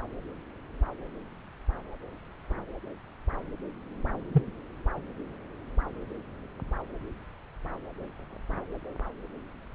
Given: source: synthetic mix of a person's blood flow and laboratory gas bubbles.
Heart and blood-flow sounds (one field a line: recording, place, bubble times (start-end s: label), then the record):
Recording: Doppler ultrasound of blood flow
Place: subclavian vein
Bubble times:
4.33-4.42 s: bubbles
From the record:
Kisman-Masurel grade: 111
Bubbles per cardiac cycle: 1 to 2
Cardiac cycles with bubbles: 1 to 10%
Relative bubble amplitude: barely perceptible (0.100 to 0.250)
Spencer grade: 1 (occasional bubble signal discernible with the cardiac motion signal, with majority of cardiac periods free of bubbles)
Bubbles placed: anywhere in the cardiac cycle